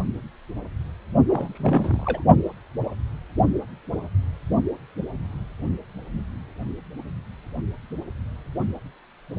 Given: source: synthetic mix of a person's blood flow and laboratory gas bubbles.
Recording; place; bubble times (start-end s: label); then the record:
Doppler ultrasound of blood flow; precordium
1.29-2.24 s: bubbles
From the record:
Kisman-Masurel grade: 221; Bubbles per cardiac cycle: several, 3 to 8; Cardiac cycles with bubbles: 10 to 50%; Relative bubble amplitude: barely perceptible (0.100 to 0.250); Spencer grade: 2 (many but less than half of the cardiac periods contain bubble signals, singularly or in groups); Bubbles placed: only in the low amplitude regions of the cardiac cycle